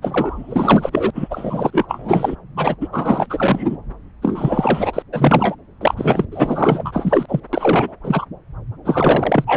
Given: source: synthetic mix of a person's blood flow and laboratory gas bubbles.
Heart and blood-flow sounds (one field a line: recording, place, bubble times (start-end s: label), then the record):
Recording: Doppler ultrasound of blood flow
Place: subclavian vein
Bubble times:
0.02-1.10 s: bubbles
1.15-1.85 s: bubbles
1.88-2.35 s: bubbles
2.56-2.75 s: bubbles
2.80-2.88 s: bubbles
2.92-3.27 s: bubbles
3.29-3.77 s: bubbles
4.22-5.03 s: bubbles
5.12-5.56 s: bubbles
5.81-6.25 s: bubbles
6.31-7.26 s: bubbles
7.29-7.40 s: bubbles
7.53-7.96 s: bubbles
8.04-8.26 s: bubbles
8.85-9.57 s: bubbles
From the record:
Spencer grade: 4 (maximum detectable bubble signal sounding continuously throughout systole and diastole of every cardiac period, and overriding the amplitude of the normal cardiac signals)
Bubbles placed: anywhere in the cardiac cycle